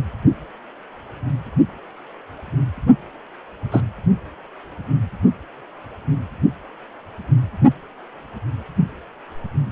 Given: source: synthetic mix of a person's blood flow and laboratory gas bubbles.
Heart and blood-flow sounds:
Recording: Doppler ultrasound of blood flow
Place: precordium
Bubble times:
3.71-3.81 s: bubbles
From the record:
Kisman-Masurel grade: 113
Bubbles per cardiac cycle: 1 to 2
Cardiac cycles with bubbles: 1 to 10%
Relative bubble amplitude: loud (0.450 to 0.775)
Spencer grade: 1 (occasional bubble signal discernible with the cardiac motion signal, with majority of cardiac periods free of bubbles)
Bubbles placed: only in the low amplitude regions of the cardiac cycle

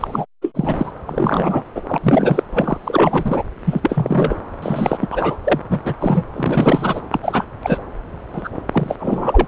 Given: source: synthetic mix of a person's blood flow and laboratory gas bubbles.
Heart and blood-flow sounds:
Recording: Doppler ultrasound of blood flow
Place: subclavian vein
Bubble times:
0.00-0.26 s: bubbles
0.42-0.92 s: bubbles
1.06-1.63 s: bubbles
1.76-1.82 s: bubbles
1.88-1.98 s: bubbles
2.03-2.43 s: bubbles
2.53-2.78 s: bubbles
2.84-3.42 s: bubbles
3.65-4.41 s: bubbles
4.62-5.08 s: bubbles
5.11-5.38 s: bubbles
5.44-5.60 s: bubbles
5.71-5.81 s: bubbles
5.84-5.95 s: bubbles
6.00-6.27 s: bubbles
6.33-7.01 s: bubbles
7.12-7.20 s: bubbles
7.23-7.45 s: bubbles
7.63-7.77 s: bubbles
8.33-8.49 s: bubbles
8.72-8.96 s: bubbles
8.99-9.47 s: bubbles
From the record:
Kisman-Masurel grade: 343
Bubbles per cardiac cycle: rolling drumbeat, 9 or more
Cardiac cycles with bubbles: 100%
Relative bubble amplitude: loud (0.450 to 0.775)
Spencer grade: 3 (all of the cardiac periods contain showers or single bubble signals, but not dominating or overriding the cardiac motion signals)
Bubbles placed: anywhere in the cardiac cycle

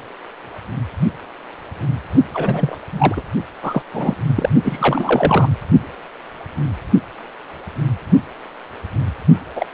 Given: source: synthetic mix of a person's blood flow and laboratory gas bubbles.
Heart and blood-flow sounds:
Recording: Doppler ultrasound of blood flow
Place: precordium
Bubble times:
2.34-2.78 s: bubbles
2.92-3.23 s: bubbles
3.62-3.82 s: bubbles
3.94-4.14 s: bubbles
4.36-4.50 s: bubbles
4.63-5.49 s: bubbles
9.56-9.67 s: bubbles
From the record:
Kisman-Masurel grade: 222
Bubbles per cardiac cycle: several, 3 to 8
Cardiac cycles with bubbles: 10 to 50%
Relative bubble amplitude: moderate (0.250 to 0.450)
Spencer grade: 2 (many but less than half of the cardiac periods contain bubble signals, singularly or in groups)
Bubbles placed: only in the low amplitude regions of the cardiac cycle

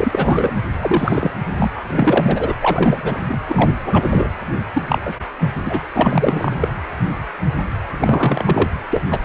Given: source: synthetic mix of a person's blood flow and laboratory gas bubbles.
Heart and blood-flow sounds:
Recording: Doppler ultrasound of blood flow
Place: precordium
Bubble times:
0.00-0.55 s: bubbles
0.81-1.31 s: bubbles
1.55-1.71 s: bubbles
1.76-1.81 s: bubbles
1.90-2.54 s: bubbles
2.61-3.38 s: bubbles
3.48-3.73 s: bubbles
3.85-4.32 s: bubbles
4.74-4.83 s: bubbles
4.87-4.99 s: bubbles
5.06-5.16 s: bubbles
5.40-5.50 s: bubbles
5.65-5.81 s: bubbles
5.94-6.73 s: bubbles
7.99-8.71 s: bubbles
8.90-9.02 s: bubbles
9.10-9.19 s: bubbles
From the record:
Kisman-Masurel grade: 333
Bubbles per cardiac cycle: rolling drumbeat, 9 or more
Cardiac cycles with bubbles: 50 to 99%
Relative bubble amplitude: loud (0.450 to 0.775)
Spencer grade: 3 (all of the cardiac periods contain showers or single bubble signals, but not dominating or overriding the cardiac motion signals)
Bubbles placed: anywhere in the cardiac cycle

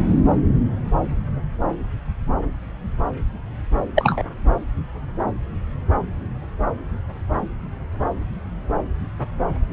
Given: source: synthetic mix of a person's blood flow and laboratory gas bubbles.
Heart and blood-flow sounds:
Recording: Doppler ultrasound of blood flow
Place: subclavian vein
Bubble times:
3.95-4.22 s: bubbles
From the record:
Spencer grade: 1 (occasional bubble signal discernible with the cardiac motion signal, with majority of cardiac periods free of bubbles)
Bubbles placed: anywhere in the cardiac cycle

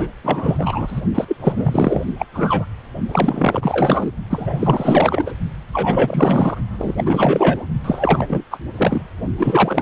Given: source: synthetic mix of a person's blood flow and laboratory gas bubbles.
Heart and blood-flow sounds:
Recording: Doppler ultrasound of blood flow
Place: precordium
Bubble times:
0.00-0.09 s: bubbles
0.23-1.01 s: bubbles
1.15-1.25 s: bubbles
1.27-1.36 s: bubbles
1.40-2.05 s: bubbles
2.18-2.26 s: bubbles
2.33-2.65 s: bubbles
3.08-4.12 s: bubbles
4.30-5.33 s: bubbles
5.73-6.58 s: bubbles
6.78-7.66 s: bubbles
7.83-8.45 s: bubbles
8.50-8.58 s: bubbles
8.76-9.03 s: bubbles
9.38-9.82 s: bubbles
From the record:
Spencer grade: 4 (maximum detectable bubble signal sounding continuously throughout systole and diastole of every cardiac period, and overriding the amplitude of the normal cardiac signals)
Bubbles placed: only in the low amplitude regions of the cardiac cycle

